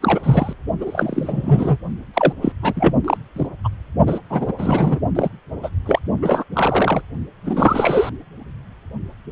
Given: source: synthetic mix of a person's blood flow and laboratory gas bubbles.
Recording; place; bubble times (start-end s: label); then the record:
Doppler ultrasound of blood flow; precordium
0.02-0.53 s: bubbles
0.81-1.77 s: bubbles
2.13-2.32 s: bubbles
2.42-2.52 s: bubbles
2.62-2.95 s: bubbles
3.04-3.17 s: bubbles
3.36-3.47 s: bubbles
3.64-3.68 s: bubbles
4.06-4.19 s: bubbles
4.29-4.53 s: bubbles
4.58-5.00 s: bubbles
5.15-5.29 s: bubbles
5.62-5.70 s: bubbles
5.85-6.00 s: bubbles
6.22-6.43 s: bubbles
6.53-7.01 s: bubbles
7.45-8.10 s: bubbles
From the record:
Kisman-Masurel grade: 233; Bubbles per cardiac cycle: several, 3 to 8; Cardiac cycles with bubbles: 50 to 99%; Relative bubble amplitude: loud (0.450 to 0.775); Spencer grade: 3 (all of the cardiac periods contain showers or single bubble signals, but not dominating or overriding the cardiac motion signals); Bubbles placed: only in the low amplitude regions of the cardiac cycle